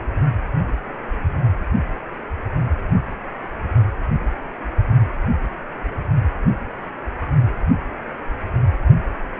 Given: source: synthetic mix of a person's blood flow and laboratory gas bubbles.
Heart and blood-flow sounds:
Doppler ultrasound of blood flow; precordium
no bubbles
From the record:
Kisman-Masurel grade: 000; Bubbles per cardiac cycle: 0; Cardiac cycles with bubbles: 0%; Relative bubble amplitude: no bubbles discernible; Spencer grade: 0 (complete lack of bubble signals)

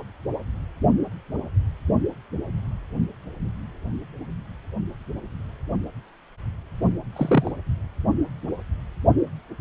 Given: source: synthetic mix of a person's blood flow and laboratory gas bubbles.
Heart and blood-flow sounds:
Doppler ultrasound of blood flow; precordium
7.12-7.52 s: bubbles
From the record:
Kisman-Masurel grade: 112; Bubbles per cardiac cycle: 1 to 2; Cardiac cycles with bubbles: 1 to 10%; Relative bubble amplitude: moderate (0.250 to 0.450); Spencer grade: 1 (occasional bubble signal discernible with the cardiac motion signal, with majority of cardiac periods free of bubbles); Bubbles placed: only in the low amplitude regions of the cardiac cycle

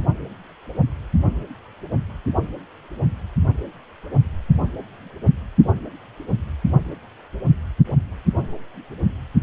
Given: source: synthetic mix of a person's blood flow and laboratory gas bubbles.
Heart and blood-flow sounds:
Doppler ultrasound of blood flow; precordium
no bubbles
From the record:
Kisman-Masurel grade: 000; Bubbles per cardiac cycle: 0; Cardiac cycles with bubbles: 0%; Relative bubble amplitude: no bubbles discernible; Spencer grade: 0 (complete lack of bubble signals)

